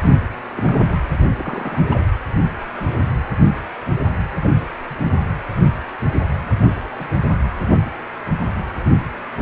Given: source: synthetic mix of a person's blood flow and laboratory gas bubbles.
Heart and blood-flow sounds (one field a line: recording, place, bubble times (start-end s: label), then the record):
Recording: Doppler ultrasound of blood flow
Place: precordium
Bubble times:
0.56-0.98 s: bubbles
1.39-1.82 s: bubbles
1.89-2.04 s: bubbles
4.42-4.52 s: bubbles
4.87-5.16 s: bubbles
6.98-7.07 s: bubbles
From the record:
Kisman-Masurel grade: 121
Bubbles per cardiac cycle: 1 to 2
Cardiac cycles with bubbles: 10 to 50%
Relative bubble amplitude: barely perceptible (0.100 to 0.250)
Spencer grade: 2 (many but less than half of the cardiac periods contain bubble signals, singularly or in groups)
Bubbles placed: anywhere in the cardiac cycle